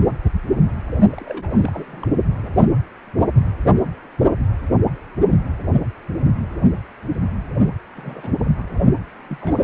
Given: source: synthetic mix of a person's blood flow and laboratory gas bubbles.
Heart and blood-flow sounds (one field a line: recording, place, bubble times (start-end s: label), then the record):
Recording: Doppler ultrasound of blood flow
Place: precordium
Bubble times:
1.12-2.09 s: bubbles
2.42-2.53 s: bubbles
7.95-8.34 s: bubbles
8.39-8.51 s: bubbles
8.58-8.64 s: bubbles
9.28-9.64 s: bubbles
From the record:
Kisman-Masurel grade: 221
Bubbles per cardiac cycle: several, 3 to 8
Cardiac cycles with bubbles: 10 to 50%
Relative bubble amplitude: barely perceptible (0.100 to 0.250)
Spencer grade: 2 (many but less than half of the cardiac periods contain bubble signals, singularly or in groups)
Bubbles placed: only in the low amplitude regions of the cardiac cycle